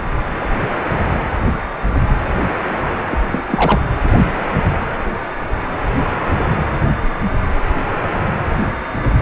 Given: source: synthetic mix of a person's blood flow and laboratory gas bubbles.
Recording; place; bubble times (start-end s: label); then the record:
Doppler ultrasound of blood flow; precordium
3.10-3.17 s: bubbles
3.30-3.43 s: bubbles
3.50-3.81 s: bubbles
From the record:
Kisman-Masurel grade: 212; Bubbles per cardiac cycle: several, 3 to 8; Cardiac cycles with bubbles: 1 to 10%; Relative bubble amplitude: moderate (0.250 to 0.450); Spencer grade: 1 (occasional bubble signal discernible with the cardiac motion signal, with majority of cardiac periods free of bubbles); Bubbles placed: anywhere in the cardiac cycle